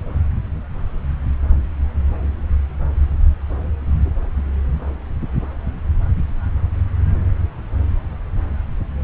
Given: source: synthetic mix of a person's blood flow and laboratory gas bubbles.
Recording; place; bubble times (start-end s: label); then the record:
Doppler ultrasound of blood flow; subclavian vein
no bubbles
From the record:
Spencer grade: 0 (complete lack of bubble signals)